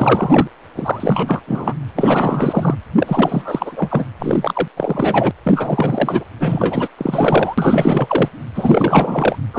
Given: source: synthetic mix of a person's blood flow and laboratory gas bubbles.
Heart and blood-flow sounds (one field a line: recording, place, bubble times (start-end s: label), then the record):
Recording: Doppler ultrasound of blood flow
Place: precordium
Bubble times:
0.00-0.48 s: bubbles
0.76-1.42 s: bubbles
1.47-1.74 s: bubbles
1.89-1.91 s: bubbles
1.96-2.75 s: bubbles
2.97-4.05 s: bubbles
4.19-4.68 s: bubbles
4.76-5.31 s: bubbles
5.43-6.24 s: bubbles
6.39-6.88 s: bubbles
6.97-8.29 s: bubbles
8.54-9.38 s: bubbles
9.53-9.59 s: bubbles
From the record:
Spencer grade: 4 (maximum detectable bubble signal sounding continuously throughout systole and diastole of every cardiac period, and overriding the amplitude of the normal cardiac signals)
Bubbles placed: anywhere in the cardiac cycle